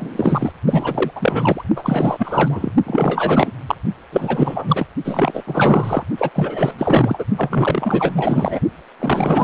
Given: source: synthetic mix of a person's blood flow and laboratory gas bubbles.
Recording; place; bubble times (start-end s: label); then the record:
Doppler ultrasound of blood flow; precordium
0.00-0.53 s: bubbles
0.67-1.11 s: bubbles
1.16-1.63 s: bubbles
1.76-2.72 s: bubbles
2.86-3.51 s: bubbles
3.67-3.75 s: bubbles
4.12-4.87 s: bubbles
5.04-5.43 s: bubbles
5.46-6.04 s: bubbles
6.17-6.30 s: bubbles
6.33-7.24 s: bubbles
7.37-8.60 s: bubbles
8.99-9.44 s: bubbles
From the record:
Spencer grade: 4 (maximum detectable bubble signal sounding continuously throughout systole and diastole of every cardiac period, and overriding the amplitude of the normal cardiac signals); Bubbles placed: only in the low amplitude regions of the cardiac cycle